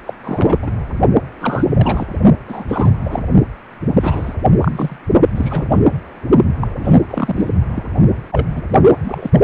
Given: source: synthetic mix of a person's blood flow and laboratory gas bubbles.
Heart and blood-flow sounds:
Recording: Doppler ultrasound of blood flow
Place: precordium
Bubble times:
0.05-0.14 s: bubbles
0.23-0.70 s: bubbles
1.41-1.65 s: bubbles
1.73-2.07 s: bubbles
2.47-2.64 s: bubbles
2.68-2.91 s: bubbles
3.04-3.25 s: bubbles
4.00-4.34 s: bubbles
4.61-4.96 s: bubbles
5.36-5.81 s: bubbles
6.61-6.67 s: bubbles
6.79-7.00 s: bubbles
7.08-7.51 s: bubbles
7.74-7.83 s: bubbles
8.31-8.46 s: bubbles
8.52-8.62 s: bubbles
9.02-9.30 s: bubbles
9.33-9.40 s: bubbles
From the record:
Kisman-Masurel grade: 243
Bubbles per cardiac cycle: several, 3 to 8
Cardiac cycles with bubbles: 100%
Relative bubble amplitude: loud (0.450 to 0.775)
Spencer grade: 3 (all of the cardiac periods contain showers or single bubble signals, but not dominating or overriding the cardiac motion signals)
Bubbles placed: only in the low amplitude regions of the cardiac cycle

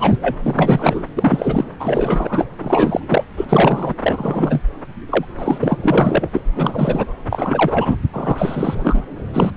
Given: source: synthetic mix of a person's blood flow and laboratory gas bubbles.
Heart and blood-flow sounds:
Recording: Doppler ultrasound of blood flow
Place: subclavian vein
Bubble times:
0.00-0.18 s: bubbles
0.21-0.35 s: bubbles
0.43-1.08 s: bubbles
1.16-1.65 s: bubbles
1.79-2.45 s: bubbles
2.58-3.00 s: bubbles
3.08-3.24 s: bubbles
3.36-3.45 s: bubbles
3.48-3.94 s: bubbles
4.02-4.61 s: bubbles
5.09-5.25 s: bubbles
5.38-5.78 s: bubbles
5.83-6.27 s: bubbles
6.32-6.41 s: bubbles
6.56-7.13 s: bubbles
7.30-7.97 s: bubbles
8.12-9.01 s: bubbles
9.33-9.52 s: bubbles
From the record:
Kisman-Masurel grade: 333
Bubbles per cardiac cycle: rolling drumbeat, 9 or more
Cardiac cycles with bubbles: 50 to 99%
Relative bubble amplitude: loud (0.450 to 0.775)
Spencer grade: 3 (all of the cardiac periods contain showers or single bubble signals, but not dominating or overriding the cardiac motion signals)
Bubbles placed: anywhere in the cardiac cycle

